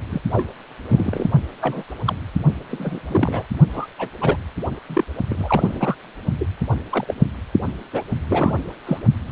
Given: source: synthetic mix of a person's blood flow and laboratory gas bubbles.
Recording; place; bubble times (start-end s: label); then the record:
Doppler ultrasound of blood flow; precordium
0.10-0.21 s: bubbles
0.33-0.48 s: bubbles
0.89-1.27 s: bubbles
1.60-1.83 s: bubbles
2.04-2.15 s: bubbles
2.69-3.43 s: bubbles
3.73-3.86 s: bubbles
3.98-4.09 s: bubbles
4.21-4.36 s: bubbles
4.87-5.04 s: bubbles
5.29-5.96 s: bubbles
6.39-6.46 s: bubbles
6.90-7.04 s: bubbles
7.07-7.14 s: bubbles
7.92-8.03 s: bubbles
8.28-8.59 s: bubbles
8.86-8.99 s: bubbles
9.27-9.32 s: bubbles
From the record:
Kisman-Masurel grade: 242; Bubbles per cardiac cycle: several, 3 to 8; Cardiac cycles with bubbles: 100%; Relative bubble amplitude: moderate (0.250 to 0.450); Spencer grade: 3 (all of the cardiac periods contain showers or single bubble signals, but not dominating or overriding the cardiac motion signals); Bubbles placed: only in the low amplitude regions of the cardiac cycle